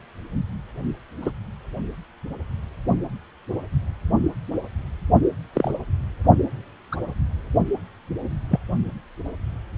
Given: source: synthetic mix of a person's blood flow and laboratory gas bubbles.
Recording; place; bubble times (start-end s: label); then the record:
Doppler ultrasound of blood flow; precordium
1.22-1.31 s: bubbles
5.53-5.71 s: bubbles
6.92-6.96 s: bubbles
8.50-8.59 s: bubbles
From the record:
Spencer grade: 2 (many but less than half of the cardiac periods contain bubble signals, singularly or in groups); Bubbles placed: only in the low amplitude regions of the cardiac cycle